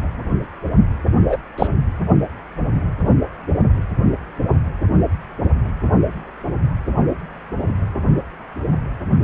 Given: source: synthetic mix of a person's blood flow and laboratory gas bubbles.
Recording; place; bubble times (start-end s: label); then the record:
Doppler ultrasound of blood flow; precordium
1.28-1.38 s: bubbles
1.58-1.68 s: bubbles
From the record:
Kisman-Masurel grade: 123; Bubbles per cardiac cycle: 1 to 2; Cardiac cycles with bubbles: 10 to 50%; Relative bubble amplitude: loud (0.450 to 0.775); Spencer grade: 2 (many but less than half of the cardiac periods contain bubble signals, singularly or in groups); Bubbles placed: only in the low amplitude regions of the cardiac cycle